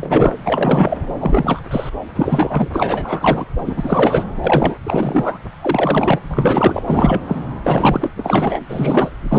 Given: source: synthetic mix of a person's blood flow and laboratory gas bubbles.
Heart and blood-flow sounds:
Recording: Doppler ultrasound of blood flow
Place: subclavian vein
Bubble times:
0.00-0.35 s: bubbles
0.45-0.97 s: bubbles
1.20-1.60 s: bubbles
1.70-1.89 s: bubbles
2.16-2.70 s: bubbles
2.73-3.45 s: bubbles
3.58-4.24 s: bubbles
4.44-4.76 s: bubbles
4.83-5.39 s: bubbles
5.62-6.19 s: bubbles
6.30-6.83 s: bubbles
6.86-7.21 s: bubbles
7.27-7.46 s: bubbles
7.62-8.10 s: bubbles
8.15-8.60 s: bubbles
8.67-9.17 s: bubbles
9.22-9.39 s: bubbles
From the record:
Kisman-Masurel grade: 343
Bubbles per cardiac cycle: rolling drumbeat, 9 or more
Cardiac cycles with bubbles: 100%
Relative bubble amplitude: loud (0.450 to 0.775)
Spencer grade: 3 (all of the cardiac periods contain showers or single bubble signals, but not dominating or overriding the cardiac motion signals)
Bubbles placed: anywhere in the cardiac cycle

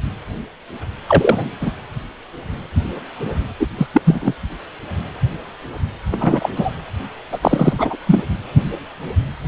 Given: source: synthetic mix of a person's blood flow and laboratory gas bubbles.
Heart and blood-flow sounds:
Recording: Doppler ultrasound of blood flow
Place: precordium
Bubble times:
1.08-1.51 s: bubbles
1.60-1.70 s: bubbles
3.60-3.67 s: bubbles
3.78-3.87 s: bubbles
3.93-4.01 s: bubbles
4.05-4.33 s: bubbles
6.11-6.49 s: bubbles
6.55-6.75 s: bubbles
7.32-7.38 s: bubbles
7.41-7.96 s: bubbles
8.06-8.23 s: bubbles
From the record:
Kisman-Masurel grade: 223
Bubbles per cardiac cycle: several, 3 to 8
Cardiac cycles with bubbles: 10 to 50%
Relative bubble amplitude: loud (0.450 to 0.775)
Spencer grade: 2 (many but less than half of the cardiac periods contain bubble signals, singularly or in groups)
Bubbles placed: anywhere in the cardiac cycle

